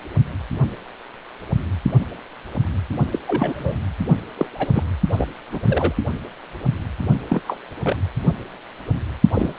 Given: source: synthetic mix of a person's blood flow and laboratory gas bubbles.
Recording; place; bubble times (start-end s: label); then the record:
Doppler ultrasound of blood flow; precordium
3.12-3.19 s: bubbles
3.27-3.76 s: bubbles
4.38-4.47 s: bubbles
4.54-4.69 s: bubbles
4.73-4.83 s: bubbles
5.12-5.27 s: bubbles
5.52-5.60 s: bubbles
5.67-5.93 s: bubbles
7.29-7.42 s: bubbles
7.46-7.57 s: bubbles
7.84-7.96 s: bubbles
9.33-9.53 s: bubbles
From the record:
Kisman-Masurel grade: 232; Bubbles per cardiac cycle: several, 3 to 8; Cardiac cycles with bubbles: 50 to 99%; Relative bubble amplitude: moderate (0.250 to 0.450); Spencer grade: 3 (all of the cardiac periods contain showers or single bubble signals, but not dominating or overriding the cardiac motion signals); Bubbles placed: only in the low amplitude regions of the cardiac cycle